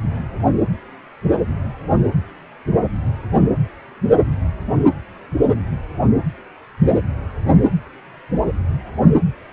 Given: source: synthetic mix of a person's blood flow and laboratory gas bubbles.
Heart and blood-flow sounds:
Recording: Doppler ultrasound of blood flow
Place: precordium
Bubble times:
no bubbles
From the record:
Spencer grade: 0 (complete lack of bubble signals)

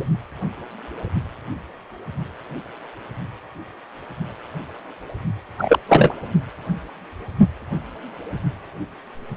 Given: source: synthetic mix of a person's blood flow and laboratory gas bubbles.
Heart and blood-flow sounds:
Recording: Doppler ultrasound of blood flow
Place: precordium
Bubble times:
0.00-0.04 s: bubbles
5.58-5.79 s: bubbles
5.88-6.15 s: bubbles
From the record:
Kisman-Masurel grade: 223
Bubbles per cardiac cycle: several, 3 to 8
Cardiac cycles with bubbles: 10 to 50%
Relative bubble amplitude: loud (0.450 to 0.775)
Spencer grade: 2 (many but less than half of the cardiac periods contain bubble signals, singularly or in groups)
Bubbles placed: only in the low amplitude regions of the cardiac cycle

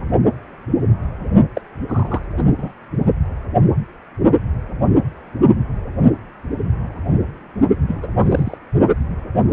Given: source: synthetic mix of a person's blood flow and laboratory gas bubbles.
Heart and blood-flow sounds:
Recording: Doppler ultrasound of blood flow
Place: precordium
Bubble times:
1.55-1.61 s: bubbles
1.88-2.22 s: bubbles
2.37-2.44 s: bubbles
2.57-2.72 s: bubbles
7.88-8.58 s: bubbles
From the record:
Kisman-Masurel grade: 222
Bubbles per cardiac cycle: several, 3 to 8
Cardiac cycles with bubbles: 10 to 50%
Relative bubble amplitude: moderate (0.250 to 0.450)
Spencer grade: 2 (many but less than half of the cardiac periods contain bubble signals, singularly or in groups)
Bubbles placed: only in the low amplitude regions of the cardiac cycle

